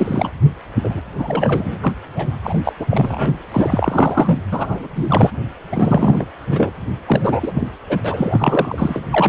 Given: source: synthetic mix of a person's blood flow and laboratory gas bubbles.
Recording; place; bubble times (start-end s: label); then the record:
Doppler ultrasound of blood flow; precordium
0.00-0.31 s: bubbles
0.83-1.01 s: bubbles
1.18-1.93 s: bubbles
2.14-2.34 s: bubbles
2.43-2.58 s: bubbles
2.63-2.72 s: bubbles
2.79-2.87 s: bubbles
2.90-3.34 s: bubbles
3.53-4.38 s: bubbles
4.51-4.88 s: bubbles
4.96-5.30 s: bubbles
5.72-6.26 s: bubbles
6.50-6.73 s: bubbles
7.06-7.52 s: bubbles
7.54-7.68 s: bubbles
7.88-8.02 s: bubbles
8.04-9.00 s: bubbles
9.12-9.29 s: bubbles
From the record:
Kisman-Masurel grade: 333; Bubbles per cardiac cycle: rolling drumbeat, 9 or more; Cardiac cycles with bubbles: 50 to 99%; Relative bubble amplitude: loud (0.450 to 0.775); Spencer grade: 3 (all of the cardiac periods contain showers or single bubble signals, but not dominating or overriding the cardiac motion signals); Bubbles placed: anywhere in the cardiac cycle